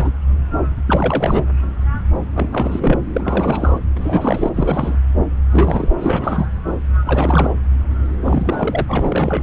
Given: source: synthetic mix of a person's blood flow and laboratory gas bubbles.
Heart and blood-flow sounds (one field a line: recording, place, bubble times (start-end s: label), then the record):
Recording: Doppler ultrasound of blood flow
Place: subclavian vein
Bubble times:
0.00-0.11 s: bubbles
0.87-1.43 s: bubbles
2.34-2.99 s: bubbles
3.13-3.79 s: bubbles
3.96-4.49 s: bubbles
4.54-4.97 s: bubbles
5.51-5.94 s: bubbles
5.98-6.46 s: bubbles
7.04-7.52 s: bubbles
8.23-9.43 s: bubbles
From the record:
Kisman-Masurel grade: 332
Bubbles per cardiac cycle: rolling drumbeat, 9 or more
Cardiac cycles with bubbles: 50 to 99%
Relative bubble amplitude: moderate (0.250 to 0.450)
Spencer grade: 3 (all of the cardiac periods contain showers or single bubble signals, but not dominating or overriding the cardiac motion signals)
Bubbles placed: anywhere in the cardiac cycle